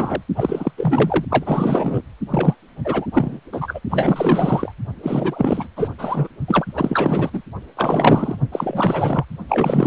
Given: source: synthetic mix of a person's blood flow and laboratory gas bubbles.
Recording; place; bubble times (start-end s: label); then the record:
Doppler ultrasound of blood flow; precordium
0.00-0.22 s: bubbles
0.36-0.72 s: bubbles
0.77-1.25 s: bubbles
1.29-2.02 s: bubbles
2.30-2.56 s: bubbles
2.84-3.06 s: bubbles
3.13-3.40 s: bubbles
3.52-3.79 s: bubbles
3.89-4.74 s: bubbles
5.03-5.68 s: bubbles
5.76-5.91 s: bubbles
5.98-6.29 s: bubbles
6.48-6.66 s: bubbles
6.76-7.30 s: bubbles
7.33-7.42 s: bubbles
7.77-8.37 s: bubbles
8.51-9.25 s: bubbles
9.48-9.87 s: bubbles
From the record:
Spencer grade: 4 (maximum detectable bubble signal sounding continuously throughout systole and diastole of every cardiac period, and overriding the amplitude of the normal cardiac signals); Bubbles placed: only in the low amplitude regions of the cardiac cycle